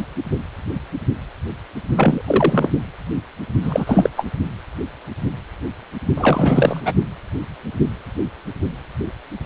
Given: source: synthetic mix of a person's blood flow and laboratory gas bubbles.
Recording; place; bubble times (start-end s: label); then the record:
Doppler ultrasound of blood flow; precordium
1.95-2.22 s: bubbles
2.26-2.68 s: bubbles
3.61-4.09 s: bubbles
4.17-4.25 s: bubbles
6.17-6.80 s: bubbles
6.84-6.93 s: bubbles
From the record:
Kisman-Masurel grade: 223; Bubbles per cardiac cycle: several, 3 to 8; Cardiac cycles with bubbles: 10 to 50%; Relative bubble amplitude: loud (0.450 to 0.775); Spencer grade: 2 (many but less than half of the cardiac periods contain bubble signals, singularly or in groups); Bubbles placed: only in the low amplitude regions of the cardiac cycle